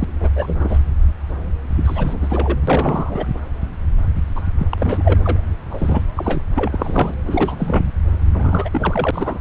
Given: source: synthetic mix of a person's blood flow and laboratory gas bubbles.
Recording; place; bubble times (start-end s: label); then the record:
Doppler ultrasound of blood flow; subclavian vein
0.01-0.04 s: bubbles
0.20-0.29 s: bubbles
0.35-0.79 s: bubbles
1.76-2.57 s: bubbles
2.67-3.26 s: bubbles
4.35-4.43 s: bubbles
4.58-5.46 s: bubbles
5.70-6.02 s: bubbles
6.16-6.42 s: bubbles
6.55-7.15 s: bubbles
7.27-7.92 s: bubbles
8.34-8.69 s: bubbles
8.71-9.41 s: bubbles
From the record:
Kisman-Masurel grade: 332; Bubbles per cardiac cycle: rolling drumbeat, 9 or more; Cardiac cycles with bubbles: 50 to 99%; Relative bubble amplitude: moderate (0.250 to 0.450); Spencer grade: 3 (all of the cardiac periods contain showers or single bubble signals, but not dominating or overriding the cardiac motion signals); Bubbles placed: anywhere in the cardiac cycle